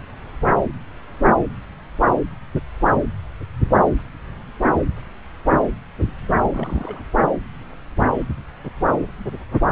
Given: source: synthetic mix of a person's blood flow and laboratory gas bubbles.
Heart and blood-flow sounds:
Doppler ultrasound of blood flow; subclavian vein
6.52-7.03 s: bubbles
From the record:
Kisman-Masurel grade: 211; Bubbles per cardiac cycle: several, 3 to 8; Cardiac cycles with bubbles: 1 to 10%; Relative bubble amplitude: barely perceptible (0.100 to 0.250); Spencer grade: 1 (occasional bubble signal discernible with the cardiac motion signal, with majority of cardiac periods free of bubbles); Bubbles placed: anywhere in the cardiac cycle

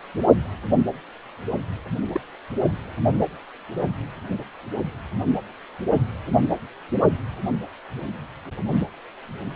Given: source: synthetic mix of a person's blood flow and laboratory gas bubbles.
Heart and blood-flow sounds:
Doppler ultrasound of blood flow; precordium
2.12-2.21 s: bubbles
From the record:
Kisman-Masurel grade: 111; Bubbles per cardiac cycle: 1 to 2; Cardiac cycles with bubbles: 1 to 10%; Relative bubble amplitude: barely perceptible (0.100 to 0.250); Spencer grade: 1 (occasional bubble signal discernible with the cardiac motion signal, with majority of cardiac periods free of bubbles); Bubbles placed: only in the low amplitude regions of the cardiac cycle

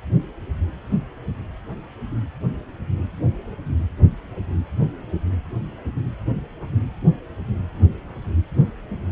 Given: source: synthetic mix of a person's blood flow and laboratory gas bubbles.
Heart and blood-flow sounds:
Doppler ultrasound of blood flow; precordium
no bubbles
From the record:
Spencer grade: 0 (complete lack of bubble signals)

